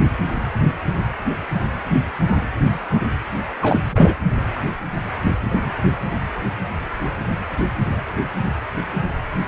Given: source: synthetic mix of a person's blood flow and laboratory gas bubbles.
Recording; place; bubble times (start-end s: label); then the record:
Doppler ultrasound of blood flow; precordium
3.61-3.80 s: bubbles
3.91-4.13 s: bubbles
From the record:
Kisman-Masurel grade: 213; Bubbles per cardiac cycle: several, 3 to 8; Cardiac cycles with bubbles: 1 to 10%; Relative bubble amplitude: loud (0.450 to 0.775); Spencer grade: 1 (occasional bubble signal discernible with the cardiac motion signal, with majority of cardiac periods free of bubbles); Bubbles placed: anywhere in the cardiac cycle